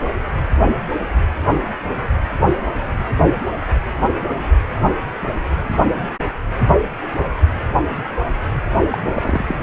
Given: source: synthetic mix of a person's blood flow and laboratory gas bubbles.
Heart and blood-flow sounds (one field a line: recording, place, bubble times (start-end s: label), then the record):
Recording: Doppler ultrasound of blood flow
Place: precordium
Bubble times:
8.90-8.98 s: bubbles
9.06-9.56 s: bubbles
From the record:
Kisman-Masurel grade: 212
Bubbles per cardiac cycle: several, 3 to 8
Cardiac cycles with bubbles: 1 to 10%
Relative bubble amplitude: moderate (0.250 to 0.450)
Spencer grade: 1 (occasional bubble signal discernible with the cardiac motion signal, with majority of cardiac periods free of bubbles)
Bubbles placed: only in the low amplitude regions of the cardiac cycle